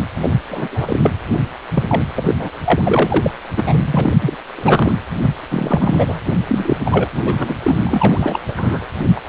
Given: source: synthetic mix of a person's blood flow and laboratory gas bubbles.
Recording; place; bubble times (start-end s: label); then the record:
Doppler ultrasound of blood flow; precordium
0.21-0.30 s: bubbles
0.51-0.68 s: bubbles
0.72-1.00 s: bubbles
1.03-1.10 s: bubbles
1.75-1.85 s: bubbles
1.88-2.02 s: bubbles
2.16-2.35 s: bubbles
2.39-2.50 s: bubbles
2.64-3.31 s: bubbles
3.56-4.14 s: bubbles
4.21-4.36 s: bubbles
4.55-4.92 s: bubbles
5.21-5.30 s: bubbles
5.43-5.46 s: bubbles
5.50-6.20 s: bubbles
6.47-6.77 s: bubbles
6.84-7.09 s: bubbles
7.12-7.57 s: bubbles
7.63-7.80 s: bubbles
7.85-8.39 s: bubbles
8.47-8.85 s: bubbles
8.93-8.95 s: bubbles
8.98-9.05 s: bubbles
9.16-9.20 s: bubbles
9.26-9.29 s: bubbles
From the record:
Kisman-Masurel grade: 343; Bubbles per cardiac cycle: rolling drumbeat, 9 or more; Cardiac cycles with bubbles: 100%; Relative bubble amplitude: loud (0.450 to 0.775); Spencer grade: 3 (all of the cardiac periods contain showers or single bubble signals, but not dominating or overriding the cardiac motion signals); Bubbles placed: anywhere in the cardiac cycle